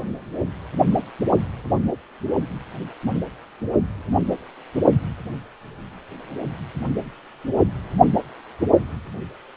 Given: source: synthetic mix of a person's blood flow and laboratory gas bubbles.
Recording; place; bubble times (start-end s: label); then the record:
Doppler ultrasound of blood flow; precordium
no bubbles
From the record:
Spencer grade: 0 (complete lack of bubble signals)